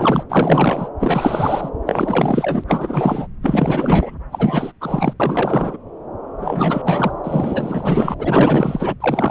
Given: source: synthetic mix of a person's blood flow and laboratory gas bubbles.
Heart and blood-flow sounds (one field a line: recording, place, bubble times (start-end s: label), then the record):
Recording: Doppler ultrasound of blood flow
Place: subclavian vein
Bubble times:
0.00-0.24 s: bubbles
0.29-0.89 s: bubbles
1.00-1.70 s: bubbles
1.86-2.64 s: bubbles
2.67-3.27 s: bubbles
3.42-4.15 s: bubbles
4.32-4.72 s: bubbles
4.80-5.13 s: bubbles
5.20-5.77 s: bubbles
6.38-8.14 s: bubbles
8.19-8.94 s: bubbles
9.00-9.31 s: bubbles
From the record:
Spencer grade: 4 (maximum detectable bubble signal sounding continuously throughout systole and diastole of every cardiac period, and overriding the amplitude of the normal cardiac signals)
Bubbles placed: anywhere in the cardiac cycle